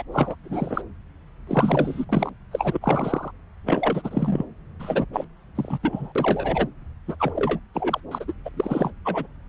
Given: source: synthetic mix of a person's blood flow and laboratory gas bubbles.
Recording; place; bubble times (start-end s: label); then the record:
Doppler ultrasound of blood flow; subclavian vein
0.00-0.02 s: bubbles
0.12-0.35 s: bubbles
0.43-0.81 s: bubbles
1.47-2.05 s: bubbles
2.09-2.29 s: bubbles
2.51-2.79 s: bubbles
2.81-3.31 s: bubbles
3.66-4.45 s: bubbles
4.79-5.05 s: bubbles
5.13-5.24 s: bubbles
5.55-5.78 s: bubbles
5.83-6.12 s: bubbles
6.15-6.67 s: bubbles
7.07-7.15 s: bubbles
7.19-7.59 s: bubbles
7.74-8.00 s: bubbles
8.11-8.24 s: bubbles
8.28-8.33 s: bubbles
8.45-8.49 s: bubbles
8.57-8.93 s: bubbles
9.05-9.26 s: bubbles
From the record:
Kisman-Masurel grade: 342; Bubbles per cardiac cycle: rolling drumbeat, 9 or more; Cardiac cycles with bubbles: 100%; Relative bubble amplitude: moderate (0.250 to 0.450); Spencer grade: 3 (all of the cardiac periods contain showers or single bubble signals, but not dominating or overriding the cardiac motion signals); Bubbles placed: anywhere in the cardiac cycle